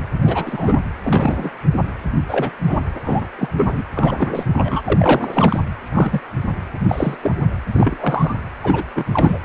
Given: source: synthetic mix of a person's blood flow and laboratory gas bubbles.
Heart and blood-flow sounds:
Doppler ultrasound of blood flow; precordium
0.00-0.07 s: bubbles
0.24-0.80 s: bubbles
1.04-1.50 s: bubbles
2.28-2.50 s: bubbles
2.67-2.79 s: bubbles
3.04-3.26 s: bubbles
3.38-3.48 s: bubbles
3.56-3.82 s: bubbles
3.95-4.82 s: bubbles
4.86-5.60 s: bubbles
5.83-6.21 s: bubbles
6.88-7.16 s: bubbles
7.23-7.35 s: bubbles
7.72-8.35 s: bubbles
8.62-8.85 s: bubbles
8.95-9.04 s: bubbles
9.13-9.38 s: bubbles
From the record:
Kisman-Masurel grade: 242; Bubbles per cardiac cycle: several, 3 to 8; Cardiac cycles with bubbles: 100%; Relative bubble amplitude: moderate (0.250 to 0.450); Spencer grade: 3 (all of the cardiac periods contain showers or single bubble signals, but not dominating or overriding the cardiac motion signals); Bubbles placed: anywhere in the cardiac cycle

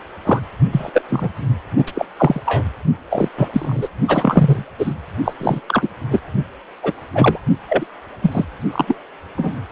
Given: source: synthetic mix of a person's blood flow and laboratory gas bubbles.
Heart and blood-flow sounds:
Doppler ultrasound of blood flow; precordium
0.00-0.03 s: bubbles
0.25-0.42 s: bubbles
0.71-1.02 s: bubbles
1.09-1.29 s: bubbles
1.76-1.92 s: bubbles
1.94-2.05 s: bubbles
2.17-2.40 s: bubbles
2.46-2.63 s: bubbles
3.10-3.28 s: bubbles
3.37-3.49 s: bubbles
3.52-3.88 s: bubbles
4.08-4.65 s: bubbles
4.79-4.94 s: bubbles
5.25-5.33 s: bubbles
5.40-5.61 s: bubbles
5.68-5.89 s: bubbles
6.11-6.21 s: bubbles
6.83-6.93 s: bubbles
7.15-7.39 s: bubbles
7.69-7.86 s: bubbles
8.22-8.45 s: bubbles
8.72-8.96 s: bubbles
9.38-9.54 s: bubbles
From the record:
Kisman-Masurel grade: 243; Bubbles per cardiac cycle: several, 3 to 8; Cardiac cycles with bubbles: 100%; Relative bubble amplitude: loud (0.450 to 0.775); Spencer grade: 3 (all of the cardiac periods contain showers or single bubble signals, but not dominating or overriding the cardiac motion signals); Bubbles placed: only in the low amplitude regions of the cardiac cycle

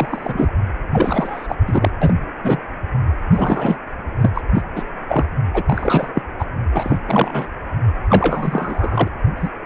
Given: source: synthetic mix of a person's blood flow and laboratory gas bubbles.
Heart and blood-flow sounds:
Doppler ultrasound of blood flow; precordium
0.00-0.48 s: bubbles
0.91-1.56 s: bubbles
1.66-1.91 s: bubbles
2.01-2.13 s: bubbles
2.44-2.57 s: bubbles
3.33-3.78 s: bubbles
4.21-4.30 s: bubbles
4.35-4.42 s: bubbles
4.54-4.63 s: bubbles
4.75-4.83 s: bubbles
5.08-5.25 s: bubbles
5.54-5.63 s: bubbles
5.69-6.12 s: bubbles
6.15-6.22 s: bubbles
6.39-6.45 s: bubbles
6.74-6.98 s: bubbles
7.07-7.47 s: bubbles
8.10-9.08 s: bubbles
9.36-9.49 s: bubbles
From the record:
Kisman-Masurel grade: 243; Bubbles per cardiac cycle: several, 3 to 8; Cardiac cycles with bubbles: 100%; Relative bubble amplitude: loud (0.450 to 0.775); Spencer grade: 3 (all of the cardiac periods contain showers or single bubble signals, but not dominating or overriding the cardiac motion signals); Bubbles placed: anywhere in the cardiac cycle

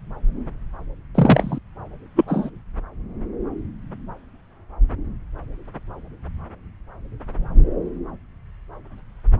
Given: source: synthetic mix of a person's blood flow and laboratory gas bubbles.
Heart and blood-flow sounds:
Doppler ultrasound of blood flow; subclavian vein
1.15-1.59 s: bubbles
2.15-2.24 s: bubbles
2.27-2.50 s: bubbles
From the record:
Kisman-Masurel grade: 123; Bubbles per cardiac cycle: 1 to 2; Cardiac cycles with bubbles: 10 to 50%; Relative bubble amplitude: loud (0.450 to 0.775); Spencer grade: 2 (many but less than half of the cardiac periods contain bubble signals, singularly or in groups); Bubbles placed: anywhere in the cardiac cycle

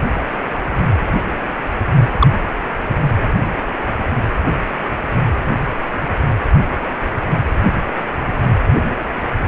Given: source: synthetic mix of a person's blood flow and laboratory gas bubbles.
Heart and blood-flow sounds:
Doppler ultrasound of blood flow; precordium
2.19-2.27 s: bubbles
From the record:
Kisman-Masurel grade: 113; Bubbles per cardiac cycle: 1 to 2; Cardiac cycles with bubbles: 1 to 10%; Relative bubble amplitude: loud (0.450 to 0.775); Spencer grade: 1 (occasional bubble signal discernible with the cardiac motion signal, with majority of cardiac periods free of bubbles); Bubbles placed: anywhere in the cardiac cycle

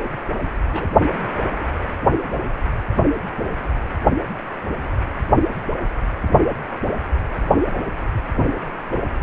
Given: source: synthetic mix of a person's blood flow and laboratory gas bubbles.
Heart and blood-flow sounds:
Doppler ultrasound of blood flow; precordium
0.73-0.86 s: bubbles
From the record:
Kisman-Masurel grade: 112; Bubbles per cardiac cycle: 1 to 2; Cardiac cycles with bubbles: 1 to 10%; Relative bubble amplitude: moderate (0.250 to 0.450); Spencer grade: 1 (occasional bubble signal discernible with the cardiac motion signal, with majority of cardiac periods free of bubbles); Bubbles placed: only in the low amplitude regions of the cardiac cycle

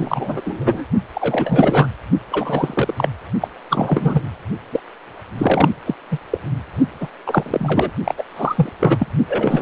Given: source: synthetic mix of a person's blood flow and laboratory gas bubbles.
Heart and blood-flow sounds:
Doppler ultrasound of blood flow; precordium
0.00-0.41 s: bubbles
0.44-0.85 s: bubbles
1.14-1.87 s: bubbles
2.31-2.94 s: bubbles
2.97-3.09 s: bubbles
3.41-3.48 s: bubbles
3.70-4.21 s: bubbles
4.72-4.80 s: bubbles
5.38-5.69 s: bubbles
5.86-5.94 s: bubbles
6.11-6.18 s: bubbles
6.31-6.38 s: bubbles
7.00-7.08 s: bubbles
7.26-7.91 s: bubbles
8.05-8.14 s: bubbles
8.17-8.23 s: bubbles
8.36-8.70 s: bubbles
8.79-9.07 s: bubbles
9.28-9.62 s: bubbles
From the record:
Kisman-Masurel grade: 343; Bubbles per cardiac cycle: rolling drumbeat, 9 or more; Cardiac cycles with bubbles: 100%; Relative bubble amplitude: loud (0.450 to 0.775); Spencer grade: 3 (all of the cardiac periods contain showers or single bubble signals, but not dominating or overriding the cardiac motion signals); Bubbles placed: only in the low amplitude regions of the cardiac cycle

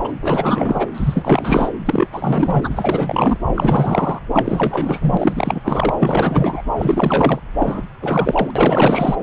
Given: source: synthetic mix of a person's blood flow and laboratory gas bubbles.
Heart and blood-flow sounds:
Doppler ultrasound of blood flow; subclavian vein
0.04-0.15 s: bubbles
0.20-0.87 s: bubbles
0.94-1.69 s: bubbles
1.85-2.06 s: bubbles
2.12-3.38 s: bubbles
3.46-4.19 s: bubbles
4.33-5.61 s: bubbles
5.63-5.95 s: bubbles
5.99-6.62 s: bubbles
6.75-7.40 s: bubbles
7.58-7.82 s: bubbles
8.01-8.51 s: bubbles
8.55-9.15 s: bubbles
From the record:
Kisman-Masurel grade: 444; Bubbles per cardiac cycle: continuous sound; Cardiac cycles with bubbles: 100%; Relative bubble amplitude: maximal (0.775 to 0.999); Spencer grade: 4 (maximum detectable bubble signal sounding continuously throughout systole and diastole of every cardiac period, and overriding the amplitude of the normal cardiac signals); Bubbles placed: anywhere in the cardiac cycle

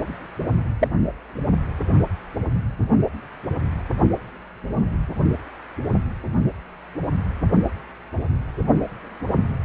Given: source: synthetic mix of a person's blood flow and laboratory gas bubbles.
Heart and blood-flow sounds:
Doppler ultrasound of blood flow; precordium
0.80-0.88 s: bubbles
From the record:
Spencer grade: 2 (many but less than half of the cardiac periods contain bubble signals, singularly or in groups); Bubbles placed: only in the low amplitude regions of the cardiac cycle

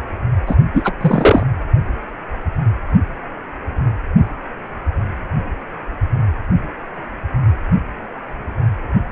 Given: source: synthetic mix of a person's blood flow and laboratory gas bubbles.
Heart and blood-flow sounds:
Doppler ultrasound of blood flow; precordium
0.47-0.56 s: bubbles
0.73-0.94 s: bubbles
1.01-1.44 s: bubbles
From the record:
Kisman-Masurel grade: 213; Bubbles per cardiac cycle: several, 3 to 8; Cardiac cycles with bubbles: 1 to 10%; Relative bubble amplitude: loud (0.450 to 0.775); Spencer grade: 1 (occasional bubble signal discernible with the cardiac motion signal, with majority of cardiac periods free of bubbles); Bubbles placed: anywhere in the cardiac cycle

